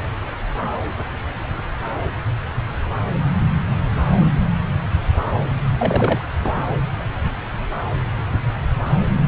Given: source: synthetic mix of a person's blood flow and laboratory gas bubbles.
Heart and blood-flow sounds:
Doppler ultrasound of blood flow; subclavian vein
5.79-6.25 s: bubbles
6.44-6.53 s: bubbles
From the record:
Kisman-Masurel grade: 222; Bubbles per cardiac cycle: several, 3 to 8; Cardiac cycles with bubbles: 10 to 50%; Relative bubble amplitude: moderate (0.250 to 0.450); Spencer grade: 2 (many but less than half of the cardiac periods contain bubble signals, singularly or in groups); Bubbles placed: anywhere in the cardiac cycle

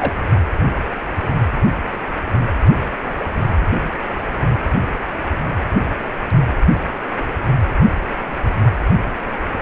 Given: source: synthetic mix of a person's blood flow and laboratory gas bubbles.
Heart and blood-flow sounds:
Doppler ultrasound of blood flow; precordium
0.00-0.13 s: bubbles
From the record:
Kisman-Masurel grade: 112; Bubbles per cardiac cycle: 1 to 2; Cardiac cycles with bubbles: 1 to 10%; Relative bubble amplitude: moderate (0.250 to 0.450); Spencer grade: 1 (occasional bubble signal discernible with the cardiac motion signal, with majority of cardiac periods free of bubbles); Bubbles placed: anywhere in the cardiac cycle

